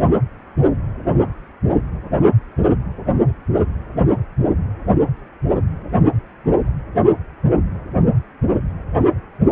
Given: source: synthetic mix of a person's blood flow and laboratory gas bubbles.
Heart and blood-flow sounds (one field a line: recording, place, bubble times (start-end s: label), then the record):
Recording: Doppler ultrasound of blood flow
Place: precordium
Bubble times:
no bubbles
From the record:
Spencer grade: 0 (complete lack of bubble signals)